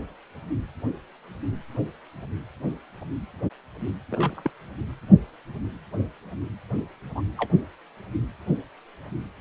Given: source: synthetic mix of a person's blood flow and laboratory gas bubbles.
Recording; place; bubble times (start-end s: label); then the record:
Doppler ultrasound of blood flow; precordium
4.11-4.51 s: bubbles
7.15-7.21 s: bubbles
7.38-7.49 s: bubbles
From the record:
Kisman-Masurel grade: 121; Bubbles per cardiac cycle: 1 to 2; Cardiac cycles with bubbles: 10 to 50%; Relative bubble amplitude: barely perceptible (0.100 to 0.250); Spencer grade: 2 (many but less than half of the cardiac periods contain bubble signals, singularly or in groups); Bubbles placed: anywhere in the cardiac cycle